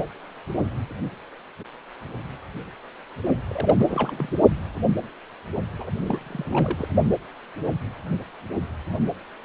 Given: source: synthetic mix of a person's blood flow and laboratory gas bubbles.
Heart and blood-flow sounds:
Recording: Doppler ultrasound of blood flow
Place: precordium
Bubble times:
3.48-4.32 s: bubbles
5.78-5.90 s: bubbles
5.95-6.88 s: bubbles
From the record:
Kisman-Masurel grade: 221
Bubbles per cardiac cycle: several, 3 to 8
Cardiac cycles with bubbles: 10 to 50%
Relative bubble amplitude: barely perceptible (0.100 to 0.250)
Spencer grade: 2 (many but less than half of the cardiac periods contain bubble signals, singularly or in groups)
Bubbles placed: only in the low amplitude regions of the cardiac cycle

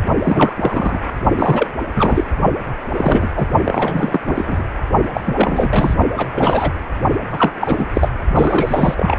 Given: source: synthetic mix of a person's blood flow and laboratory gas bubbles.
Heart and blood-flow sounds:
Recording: Doppler ultrasound of blood flow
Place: precordium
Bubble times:
0.24-0.53 s: bubbles
0.55-1.01 s: bubbles
1.36-1.71 s: bubbles
1.96-2.24 s: bubbles
2.94-3.28 s: bubbles
3.34-3.47 s: bubbles
3.64-4.20 s: bubbles
4.27-4.62 s: bubbles
5.14-5.21 s: bubbles
5.25-5.94 s: bubbles
6.16-6.28 s: bubbles
6.34-6.73 s: bubbles
7.32-7.53 s: bubbles
7.60-7.87 s: bubbles
7.93-8.08 s: bubbles
8.32-9.19 s: bubbles
From the record:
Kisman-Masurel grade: 343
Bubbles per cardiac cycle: rolling drumbeat, 9 or more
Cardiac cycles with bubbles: 100%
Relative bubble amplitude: loud (0.450 to 0.775)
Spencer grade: 3 (all of the cardiac periods contain showers or single bubble signals, but not dominating or overriding the cardiac motion signals)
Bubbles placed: only in the low amplitude regions of the cardiac cycle

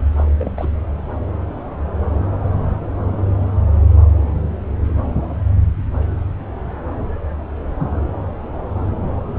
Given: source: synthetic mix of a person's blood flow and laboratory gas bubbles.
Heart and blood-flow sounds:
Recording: Doppler ultrasound of blood flow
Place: subclavian vein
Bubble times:
0.17-0.24 s: bubbles
0.38-0.52 s: bubbles
0.56-0.71 s: bubbles
From the record:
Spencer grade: 1 (occasional bubble signal discernible with the cardiac motion signal, with majority of cardiac periods free of bubbles)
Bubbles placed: anywhere in the cardiac cycle

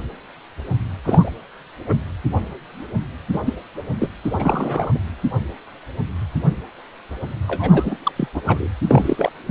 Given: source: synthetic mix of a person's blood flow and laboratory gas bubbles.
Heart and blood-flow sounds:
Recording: Doppler ultrasound of blood flow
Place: precordium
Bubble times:
1.04-1.30 s: bubbles
1.87-1.99 s: bubbles
3.33-3.40 s: bubbles
3.46-3.54 s: bubbles
3.99-4.08 s: bubbles
4.23-5.00 s: bubbles
7.47-7.97 s: bubbles
8.04-8.12 s: bubbles
8.17-8.28 s: bubbles
8.34-8.42 s: bubbles
8.45-8.68 s: bubbles
8.91-9.32 s: bubbles
9.46-9.51 s: bubbles
From the record:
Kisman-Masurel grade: 222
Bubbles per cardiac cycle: several, 3 to 8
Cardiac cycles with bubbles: 10 to 50%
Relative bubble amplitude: moderate (0.250 to 0.450)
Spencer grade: 2 (many but less than half of the cardiac periods contain bubble signals, singularly or in groups)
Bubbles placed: anywhere in the cardiac cycle

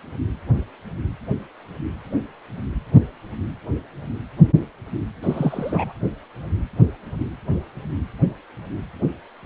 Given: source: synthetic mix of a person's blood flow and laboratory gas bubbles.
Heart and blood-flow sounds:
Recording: Doppler ultrasound of blood flow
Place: precordium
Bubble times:
5.22-5.93 s: bubbles
From the record:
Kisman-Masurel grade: 113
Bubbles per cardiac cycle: 1 to 2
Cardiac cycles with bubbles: 1 to 10%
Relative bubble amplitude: loud (0.450 to 0.775)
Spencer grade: 1 (occasional bubble signal discernible with the cardiac motion signal, with majority of cardiac periods free of bubbles)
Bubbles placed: anywhere in the cardiac cycle

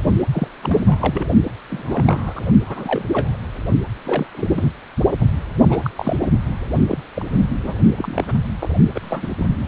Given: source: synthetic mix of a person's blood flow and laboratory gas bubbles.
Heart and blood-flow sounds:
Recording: Doppler ultrasound of blood flow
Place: precordium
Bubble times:
0.32-0.48 s: bubbles
0.62-1.27 s: bubbles
1.69-2.42 s: bubbles
2.66-3.06 s: bubbles
3.12-3.37 s: bubbles
4.05-4.26 s: bubbles
4.33-4.71 s: bubbles
5.20-5.25 s: bubbles
5.69-5.80 s: bubbles
5.82-5.90 s: bubbles
5.97-6.16 s: bubbles
6.22-6.26 s: bubbles
6.88-6.98 s: bubbles
7.14-7.25 s: bubbles
7.29-7.47 s: bubbles
7.62-7.76 s: bubbles
7.97-8.34 s: bubbles
8.61-8.69 s: bubbles
8.95-9.28 s: bubbles
9.38-9.46 s: bubbles
From the record:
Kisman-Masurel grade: 242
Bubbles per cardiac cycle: several, 3 to 8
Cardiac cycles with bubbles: 100%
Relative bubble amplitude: moderate (0.250 to 0.450)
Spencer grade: 3 (all of the cardiac periods contain showers or single bubble signals, but not dominating or overriding the cardiac motion signals)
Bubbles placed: only in the low amplitude regions of the cardiac cycle

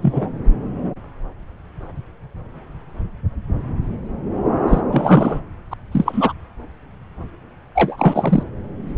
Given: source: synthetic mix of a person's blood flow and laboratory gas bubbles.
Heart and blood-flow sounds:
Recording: Doppler ultrasound of blood flow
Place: subclavian vein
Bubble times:
0.02-0.31 s: bubbles
4.68-4.81 s: bubbles
4.92-5.40 s: bubbles
5.71-5.73 s: bubbles
5.92-6.33 s: bubbles
7.75-8.43 s: bubbles
From the record:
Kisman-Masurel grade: 223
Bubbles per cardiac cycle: several, 3 to 8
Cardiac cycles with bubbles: 10 to 50%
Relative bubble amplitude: loud (0.450 to 0.775)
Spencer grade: 2 (many but less than half of the cardiac periods contain bubble signals, singularly or in groups)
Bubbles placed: anywhere in the cardiac cycle

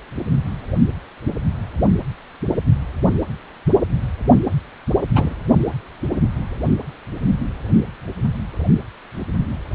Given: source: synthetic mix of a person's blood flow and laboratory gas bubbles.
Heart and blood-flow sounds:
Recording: Doppler ultrasound of blood flow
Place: precordium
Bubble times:
5.15-5.34 s: bubbles
From the record:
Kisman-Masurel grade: 112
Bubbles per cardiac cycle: 1 to 2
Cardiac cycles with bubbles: 1 to 10%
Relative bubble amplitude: moderate (0.250 to 0.450)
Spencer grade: 1 (occasional bubble signal discernible with the cardiac motion signal, with majority of cardiac periods free of bubbles)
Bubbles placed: anywhere in the cardiac cycle

